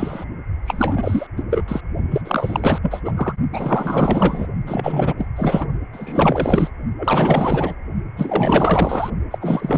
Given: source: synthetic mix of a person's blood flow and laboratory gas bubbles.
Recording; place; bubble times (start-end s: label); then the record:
Doppler ultrasound of blood flow; precordium
0.00-0.24 s: bubbles
0.66-1.27 s: bubbles
1.36-1.43 s: bubbles
1.50-1.63 s: bubbles
1.68-1.81 s: bubbles
2.10-2.21 s: bubbles
2.25-2.79 s: bubbles
2.82-3.00 s: bubbles
3.04-3.12 s: bubbles
3.16-3.33 s: bubbles
3.52-4.47 s: bubbles
4.67-5.13 s: bubbles
5.17-5.27 s: bubbles
5.36-5.67 s: bubbles
5.92-6.70 s: bubbles
6.97-7.74 s: bubbles
8.17-9.10 s: bubbles
9.30-9.38 s: bubbles
9.41-9.78 s: bubbles
From the record:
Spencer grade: 4 (maximum detectable bubble signal sounding continuously throughout systole and diastole of every cardiac period, and overriding the amplitude of the normal cardiac signals); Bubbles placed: only in the low amplitude regions of the cardiac cycle